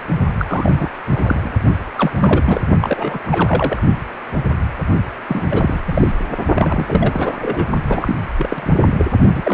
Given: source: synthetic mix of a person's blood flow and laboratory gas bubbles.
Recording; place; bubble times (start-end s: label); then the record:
Doppler ultrasound of blood flow; precordium
0.39-0.90 s: bubbles
1.09-1.50 s: bubbles
1.97-2.61 s: bubbles
2.81-3.19 s: bubbles
3.27-3.83 s: bubbles
5.28-5.48 s: bubbles
5.50-5.81 s: bubbles
5.87-6.12 s: bubbles
6.55-7.36 s: bubbles
7.41-7.69 s: bubbles
7.89-8.16 s: bubbles
8.37-9.05 s: bubbles
9.35-9.54 s: bubbles
From the record:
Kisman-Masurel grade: 332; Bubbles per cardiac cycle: rolling drumbeat, 9 or more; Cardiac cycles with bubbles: 50 to 99%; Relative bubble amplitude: moderate (0.250 to 0.450); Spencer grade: 3 (all of the cardiac periods contain showers or single bubble signals, but not dominating or overriding the cardiac motion signals); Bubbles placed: only in the low amplitude regions of the cardiac cycle